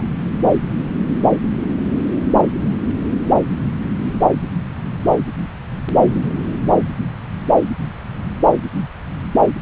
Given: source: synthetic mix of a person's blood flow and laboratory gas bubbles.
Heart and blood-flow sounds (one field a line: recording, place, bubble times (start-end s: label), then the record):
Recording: Doppler ultrasound of blood flow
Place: subclavian vein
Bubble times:
0.00-0.03 s: bubbles
From the record:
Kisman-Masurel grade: 211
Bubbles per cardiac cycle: several, 3 to 8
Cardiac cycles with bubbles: 1 to 10%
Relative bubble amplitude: barely perceptible (0.100 to 0.250)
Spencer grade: 1 (occasional bubble signal discernible with the cardiac motion signal, with majority of cardiac periods free of bubbles)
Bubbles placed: anywhere in the cardiac cycle